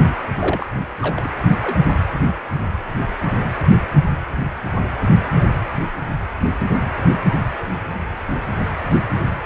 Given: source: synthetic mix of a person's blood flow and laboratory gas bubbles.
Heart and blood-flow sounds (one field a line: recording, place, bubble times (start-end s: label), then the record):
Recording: Doppler ultrasound of blood flow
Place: precordium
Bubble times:
0.08-0.14 s: bubbles
0.35-0.69 s: bubbles
1.02-1.29 s: bubbles
1.62-1.77 s: bubbles
From the record:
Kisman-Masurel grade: 211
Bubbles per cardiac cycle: several, 3 to 8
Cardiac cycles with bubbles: 1 to 10%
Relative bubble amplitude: barely perceptible (0.100 to 0.250)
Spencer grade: 1 (occasional bubble signal discernible with the cardiac motion signal, with majority of cardiac periods free of bubbles)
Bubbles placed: anywhere in the cardiac cycle